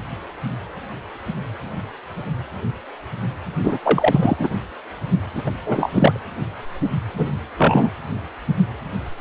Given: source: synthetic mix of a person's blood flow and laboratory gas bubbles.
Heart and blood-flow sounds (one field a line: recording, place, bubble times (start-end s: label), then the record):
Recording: Doppler ultrasound of blood flow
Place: precordium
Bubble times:
3.63-3.79 s: bubbles
3.84-4.37 s: bubbles
4.39-4.54 s: bubbles
5.34-5.42 s: bubbles
5.46-5.52 s: bubbles
5.66-6.18 s: bubbles
7.17-7.29 s: bubbles
7.57-7.91 s: bubbles
From the record:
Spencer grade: 2 (many but less than half of the cardiac periods contain bubble signals, singularly or in groups)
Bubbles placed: anywhere in the cardiac cycle